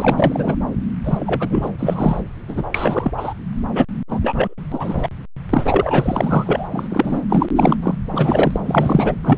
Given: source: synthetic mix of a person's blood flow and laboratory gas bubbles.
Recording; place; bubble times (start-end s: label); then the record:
Doppler ultrasound of blood flow; subclavian vein
0.00-0.57 s: bubbles
1.04-1.70 s: bubbles
1.79-2.20 s: bubbles
2.48-2.63 s: bubbles
2.74-3.11 s: bubbles
3.17-3.33 s: bubbles
3.72-3.85 s: bubbles
4.08-4.54 s: bubbles
4.71-5.08 s: bubbles
5.50-6.68 s: bubbles
6.71-7.21 s: bubbles
7.29-7.46 s: bubbles
7.55-7.76 s: bubbles
7.82-7.95 s: bubbles
8.13-8.60 s: bubbles
8.65-9.14 s: bubbles
9.24-9.38 s: bubbles
From the record:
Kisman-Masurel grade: 444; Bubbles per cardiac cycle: continuous sound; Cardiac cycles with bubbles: 100%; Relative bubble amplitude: maximal (0.775 to 0.999); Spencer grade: 4 (maximum detectable bubble signal sounding continuously throughout systole and diastole of every cardiac period, and overriding the amplitude of the normal cardiac signals); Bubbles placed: anywhere in the cardiac cycle